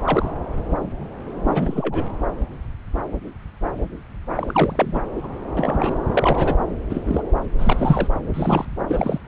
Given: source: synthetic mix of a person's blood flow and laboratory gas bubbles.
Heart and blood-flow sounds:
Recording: Doppler ultrasound of blood flow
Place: subclavian vein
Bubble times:
0.00-0.31 s: bubbles
1.45-2.04 s: bubbles
4.35-5.01 s: bubbles
5.15-5.27 s: bubbles
5.57-5.97 s: bubbles
6.11-6.56 s: bubbles
6.90-7.02 s: bubbles
7.06-7.23 s: bubbles
7.58-8.08 s: bubbles
8.33-8.65 s: bubbles
8.88-9.19 s: bubbles
From the record:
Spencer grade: 3 (all of the cardiac periods contain showers or single bubble signals, but not dominating or overriding the cardiac motion signals)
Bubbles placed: anywhere in the cardiac cycle

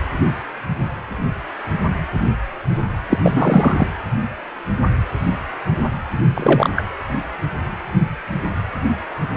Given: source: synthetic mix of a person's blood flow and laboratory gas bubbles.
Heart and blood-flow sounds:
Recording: Doppler ultrasound of blood flow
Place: precordium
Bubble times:
3.09-3.17 s: bubbles
3.23-3.87 s: bubbles
6.34-6.70 s: bubbles
6.76-6.83 s: bubbles
From the record:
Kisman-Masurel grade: 223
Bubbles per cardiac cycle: several, 3 to 8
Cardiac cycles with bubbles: 10 to 50%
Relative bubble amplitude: loud (0.450 to 0.775)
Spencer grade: 2 (many but less than half of the cardiac periods contain bubble signals, singularly or in groups)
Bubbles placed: anywhere in the cardiac cycle

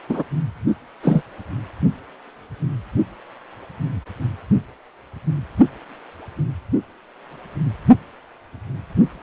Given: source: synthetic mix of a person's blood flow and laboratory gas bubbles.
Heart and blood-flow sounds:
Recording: Doppler ultrasound of blood flow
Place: precordium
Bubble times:
0.09-0.24 s: bubbles
1.03-1.22 s: bubbles
From the record:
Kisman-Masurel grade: 123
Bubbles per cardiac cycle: 1 to 2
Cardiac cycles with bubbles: 10 to 50%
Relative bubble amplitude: loud (0.450 to 0.775)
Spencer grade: 2 (many but less than half of the cardiac periods contain bubble signals, singularly or in groups)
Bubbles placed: only in the low amplitude regions of the cardiac cycle

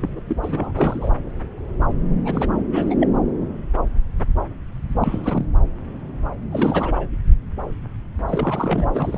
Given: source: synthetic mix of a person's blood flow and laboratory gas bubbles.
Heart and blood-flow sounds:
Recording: Doppler ultrasound of blood flow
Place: subclavian vein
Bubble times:
0.01-0.09 s: bubbles
0.16-0.21 s: bubbles
0.28-0.36 s: bubbles
0.42-0.71 s: bubbles
0.77-1.10 s: bubbles
2.25-2.48 s: bubbles
2.67-2.95 s: bubbles
3.00-3.08 s: bubbles
5.01-5.46 s: bubbles
6.51-7.07 s: bubbles
8.29-9.18 s: bubbles
From the record:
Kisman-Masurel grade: 332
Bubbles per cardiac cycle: rolling drumbeat, 9 or more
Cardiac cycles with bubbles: 50 to 99%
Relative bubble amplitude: moderate (0.250 to 0.450)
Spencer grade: 3 (all of the cardiac periods contain showers or single bubble signals, but not dominating or overriding the cardiac motion signals)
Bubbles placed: anywhere in the cardiac cycle

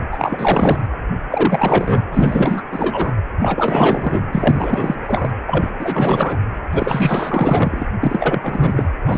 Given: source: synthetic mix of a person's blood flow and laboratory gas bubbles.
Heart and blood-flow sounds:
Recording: Doppler ultrasound of blood flow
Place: precordium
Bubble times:
0.12-0.87 s: bubbles
1.29-2.04 s: bubbles
2.12-2.62 s: bubbles
2.71-3.17 s: bubbles
3.40-4.26 s: bubbles
4.33-5.31 s: bubbles
5.46-5.70 s: bubbles
5.79-6.37 s: bubbles
6.72-7.87 s: bubbles
8.02-8.89 s: bubbles
9.05-9.18 s: bubbles
From the record:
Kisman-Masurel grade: 444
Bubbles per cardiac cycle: continuous sound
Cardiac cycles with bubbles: 100%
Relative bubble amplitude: maximal (0.775 to 0.999)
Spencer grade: 4 (maximum detectable bubble signal sounding continuously throughout systole and diastole of every cardiac period, and overriding the amplitude of the normal cardiac signals)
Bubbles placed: anywhere in the cardiac cycle

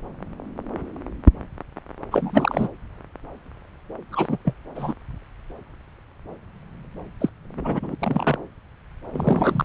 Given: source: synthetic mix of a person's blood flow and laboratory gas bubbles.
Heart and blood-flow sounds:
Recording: Doppler ultrasound of blood flow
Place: subclavian vein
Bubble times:
2.11-2.69 s: bubbles
4.12-4.38 s: bubbles
4.45-4.54 s: bubbles
4.75-4.94 s: bubbles
7.21-7.29 s: bubbles
7.57-7.95 s: bubbles
8.00-8.38 s: bubbles
9.12-9.65 s: bubbles
From the record:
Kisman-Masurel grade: 232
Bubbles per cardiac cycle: several, 3 to 8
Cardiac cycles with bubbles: 50 to 99%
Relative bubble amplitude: moderate (0.250 to 0.450)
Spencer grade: 3 (all of the cardiac periods contain showers or single bubble signals, but not dominating or overriding the cardiac motion signals)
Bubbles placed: anywhere in the cardiac cycle

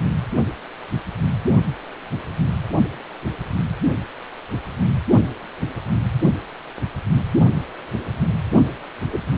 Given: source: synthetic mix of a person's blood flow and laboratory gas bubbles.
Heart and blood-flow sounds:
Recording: Doppler ultrasound of blood flow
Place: precordium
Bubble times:
9.12-9.19 s: bubbles
From the record:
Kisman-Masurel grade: 113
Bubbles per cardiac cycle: 1 to 2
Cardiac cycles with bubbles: 1 to 10%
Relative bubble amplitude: loud (0.450 to 0.775)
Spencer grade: 1 (occasional bubble signal discernible with the cardiac motion signal, with majority of cardiac periods free of bubbles)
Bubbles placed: only in the low amplitude regions of the cardiac cycle

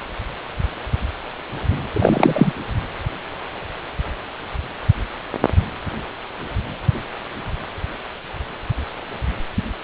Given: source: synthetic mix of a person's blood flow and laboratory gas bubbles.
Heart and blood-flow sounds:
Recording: Doppler ultrasound of blood flow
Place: precordium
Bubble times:
1.93-2.53 s: bubbles
From the record:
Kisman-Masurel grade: 223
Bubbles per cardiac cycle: several, 3 to 8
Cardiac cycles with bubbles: 10 to 50%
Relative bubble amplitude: loud (0.450 to 0.775)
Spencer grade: 2 (many but less than half of the cardiac periods contain bubble signals, singularly or in groups)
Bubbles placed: anywhere in the cardiac cycle

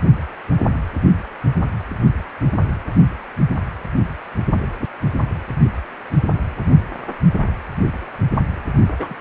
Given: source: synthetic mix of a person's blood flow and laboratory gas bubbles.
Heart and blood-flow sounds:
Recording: Doppler ultrasound of blood flow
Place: precordium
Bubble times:
8.98-9.16 s: bubbles
From the record:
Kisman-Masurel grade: 211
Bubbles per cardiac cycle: several, 3 to 8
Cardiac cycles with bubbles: 1 to 10%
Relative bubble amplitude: barely perceptible (0.100 to 0.250)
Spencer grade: 1 (occasional bubble signal discernible with the cardiac motion signal, with majority of cardiac periods free of bubbles)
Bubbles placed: only in the low amplitude regions of the cardiac cycle

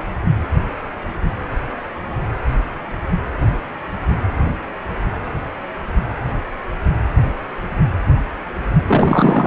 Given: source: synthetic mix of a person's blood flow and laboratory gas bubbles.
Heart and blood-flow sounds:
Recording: Doppler ultrasound of blood flow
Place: precordium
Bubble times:
8.87-9.47 s: bubbles
From the record:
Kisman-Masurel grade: 223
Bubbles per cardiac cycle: several, 3 to 8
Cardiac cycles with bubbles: 10 to 50%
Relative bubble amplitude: loud (0.450 to 0.775)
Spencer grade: 2 (many but less than half of the cardiac periods contain bubble signals, singularly or in groups)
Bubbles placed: anywhere in the cardiac cycle

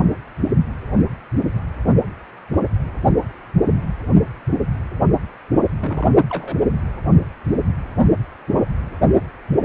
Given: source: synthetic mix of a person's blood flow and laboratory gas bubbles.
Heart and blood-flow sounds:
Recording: Doppler ultrasound of blood flow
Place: precordium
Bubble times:
5.61-5.66 s: bubbles
5.82-6.11 s: bubbles
6.29-6.57 s: bubbles
7.98-8.07 s: bubbles
From the record:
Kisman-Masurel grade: 121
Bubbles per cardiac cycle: 1 to 2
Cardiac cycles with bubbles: 10 to 50%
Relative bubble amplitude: barely perceptible (0.100 to 0.250)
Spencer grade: 2 (many but less than half of the cardiac periods contain bubble signals, singularly or in groups)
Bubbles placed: only in the low amplitude regions of the cardiac cycle

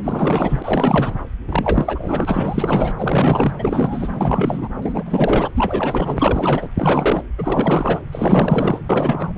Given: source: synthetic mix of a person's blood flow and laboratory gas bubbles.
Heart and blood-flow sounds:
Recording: Doppler ultrasound of blood flow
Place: subclavian vein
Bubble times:
0.03-1.15 s: bubbles
1.49-2.92 s: bubbles
2.98-3.53 s: bubbles
3.58-4.68 s: bubbles
4.82-5.51 s: bubbles
5.55-6.68 s: bubbles
6.77-7.23 s: bubbles
7.38-8.01 s: bubbles
8.12-8.79 s: bubbles
8.89-9.33 s: bubbles
From the record:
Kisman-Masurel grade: 444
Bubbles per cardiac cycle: continuous sound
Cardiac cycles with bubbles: 100%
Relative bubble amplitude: maximal (0.775 to 0.999)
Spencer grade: 4 (maximum detectable bubble signal sounding continuously throughout systole and diastole of every cardiac period, and overriding the amplitude of the normal cardiac signals)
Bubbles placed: anywhere in the cardiac cycle

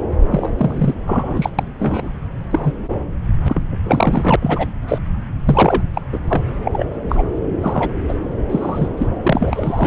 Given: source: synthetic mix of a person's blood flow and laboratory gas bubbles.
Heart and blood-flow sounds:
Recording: Doppler ultrasound of blood flow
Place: subclavian vein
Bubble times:
0.30-0.51 s: bubbles
0.58-0.93 s: bubbles
1.06-1.49 s: bubbles
1.58-1.64 s: bubbles
1.78-2.10 s: bubbles
2.50-2.73 s: bubbles
3.48-3.61 s: bubbles
3.84-4.36 s: bubbles
4.41-4.67 s: bubbles
4.88-4.99 s: bubbles
5.45-5.82 s: bubbles
5.95-6.02 s: bubbles
6.12-6.19 s: bubbles
6.28-6.42 s: bubbles
6.62-6.86 s: bubbles
7.09-7.24 s: bubbles
7.62-7.93 s: bubbles
8.08-8.14 s: bubbles
8.49-8.88 s: bubbles
8.97-9.08 s: bubbles
9.23-9.87 s: bubbles
From the record:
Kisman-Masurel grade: 243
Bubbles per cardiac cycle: several, 3 to 8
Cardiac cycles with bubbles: 100%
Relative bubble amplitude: loud (0.450 to 0.775)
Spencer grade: 3 (all of the cardiac periods contain showers or single bubble signals, but not dominating or overriding the cardiac motion signals)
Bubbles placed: anywhere in the cardiac cycle

